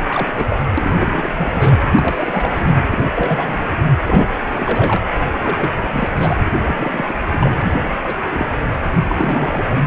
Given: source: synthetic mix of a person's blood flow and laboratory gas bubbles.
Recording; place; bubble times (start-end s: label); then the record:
Doppler ultrasound of blood flow; precordium
0.08-0.29 s: bubbles
0.37-0.45 s: bubbles
0.49-0.59 s: bubbles
0.77-1.78 s: bubbles
1.82-2.74 s: bubbles
2.82-2.88 s: bubbles
2.90-3.05 s: bubbles
3.15-3.58 s: bubbles
4.06-4.29 s: bubbles
4.54-5.01 s: bubbles
5.40-5.72 s: bubbles
5.82-6.09 s: bubbles
6.15-6.35 s: bubbles
6.44-6.50 s: bubbles
6.65-7.05 s: bubbles
7.07-7.14 s: bubbles
7.31-7.55 s: bubbles
7.57-7.92 s: bubbles
8.02-8.15 s: bubbles
8.30-8.56 s: bubbles
8.88-9.69 s: bubbles
From the record:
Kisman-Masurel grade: 342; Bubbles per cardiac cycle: rolling drumbeat, 9 or more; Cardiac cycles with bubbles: 100%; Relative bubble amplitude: moderate (0.250 to 0.450); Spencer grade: 3 (all of the cardiac periods contain showers or single bubble signals, but not dominating or overriding the cardiac motion signals); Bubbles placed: anywhere in the cardiac cycle